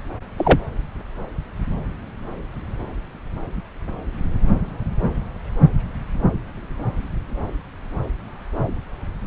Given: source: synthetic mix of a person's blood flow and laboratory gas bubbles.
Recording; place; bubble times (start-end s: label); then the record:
Doppler ultrasound of blood flow; subclavian vein
0.38-0.58 s: bubbles
From the record:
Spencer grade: 1 (occasional bubble signal discernible with the cardiac motion signal, with majority of cardiac periods free of bubbles); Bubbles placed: anywhere in the cardiac cycle